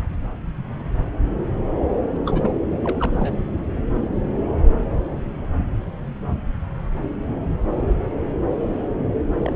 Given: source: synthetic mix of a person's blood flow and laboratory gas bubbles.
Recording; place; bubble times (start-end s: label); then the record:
Doppler ultrasound of blood flow; subclavian vein
2.26-2.53 s: bubbles
2.84-3.36 s: bubbles
9.42-9.53 s: bubbles
From the record:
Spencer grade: 2 (many but less than half of the cardiac periods contain bubble signals, singularly or in groups); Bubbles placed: anywhere in the cardiac cycle